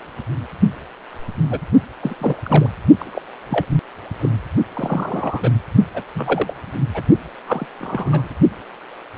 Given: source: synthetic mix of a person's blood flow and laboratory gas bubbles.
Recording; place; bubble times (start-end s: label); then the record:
Doppler ultrasound of blood flow; precordium
1.50-1.60 s: bubbles
2.02-2.36 s: bubbles
2.43-2.69 s: bubbles
2.99-3.21 s: bubbles
3.49-3.66 s: bubbles
4.21-4.29 s: bubbles
4.73-5.50 s: bubbles
5.93-6.03 s: bubbles
6.14-6.53 s: bubbles
6.93-7.02 s: bubbles
7.46-7.66 s: bubbles
7.79-8.29 s: bubbles
From the record:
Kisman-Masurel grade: 232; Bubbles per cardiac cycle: several, 3 to 8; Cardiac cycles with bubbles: 50 to 99%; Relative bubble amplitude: moderate (0.250 to 0.450); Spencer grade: 3 (all of the cardiac periods contain showers or single bubble signals, but not dominating or overriding the cardiac motion signals); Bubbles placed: only in the low amplitude regions of the cardiac cycle